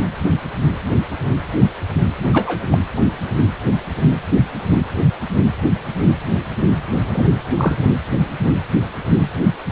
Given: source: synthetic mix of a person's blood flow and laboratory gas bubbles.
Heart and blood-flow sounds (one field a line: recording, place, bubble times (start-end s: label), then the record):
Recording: Doppler ultrasound of blood flow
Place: precordium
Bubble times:
2.32-2.64 s: bubbles
2.71-2.77 s: bubbles
7.10-7.31 s: bubbles
7.58-7.75 s: bubbles
From the record:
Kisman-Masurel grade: 223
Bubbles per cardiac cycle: several, 3 to 8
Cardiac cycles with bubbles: 10 to 50%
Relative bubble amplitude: loud (0.450 to 0.775)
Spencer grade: 2 (many but less than half of the cardiac periods contain bubble signals, singularly or in groups)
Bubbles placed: anywhere in the cardiac cycle